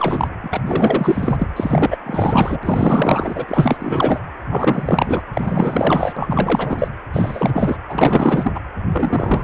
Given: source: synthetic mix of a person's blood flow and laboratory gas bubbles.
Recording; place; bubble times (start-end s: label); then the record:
Doppler ultrasound of blood flow; precordium
0.00-0.27 s: bubbles
0.42-1.52 s: bubbles
1.56-1.97 s: bubbles
2.06-2.58 s: bubbles
2.63-4.21 s: bubbles
4.50-5.22 s: bubbles
5.33-6.13 s: bubbles
6.16-6.95 s: bubbles
7.13-7.77 s: bubbles
7.88-8.52 s: bubbles
8.54-8.61 s: bubbles
8.92-9.44 s: bubbles
From the record:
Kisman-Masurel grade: 444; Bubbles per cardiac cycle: continuous sound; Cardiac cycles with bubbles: 100%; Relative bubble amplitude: maximal (0.775 to 0.999); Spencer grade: 4 (maximum detectable bubble signal sounding continuously throughout systole and diastole of every cardiac period, and overriding the amplitude of the normal cardiac signals); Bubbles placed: anywhere in the cardiac cycle